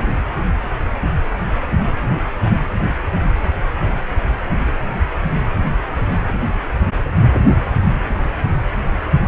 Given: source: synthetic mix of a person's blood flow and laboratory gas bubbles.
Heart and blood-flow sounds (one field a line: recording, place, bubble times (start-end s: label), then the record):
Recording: Doppler ultrasound of blood flow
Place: precordium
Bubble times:
7.21-7.39 s: bubbles
From the record:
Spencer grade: 1 (occasional bubble signal discernible with the cardiac motion signal, with majority of cardiac periods free of bubbles)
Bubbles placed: anywhere in the cardiac cycle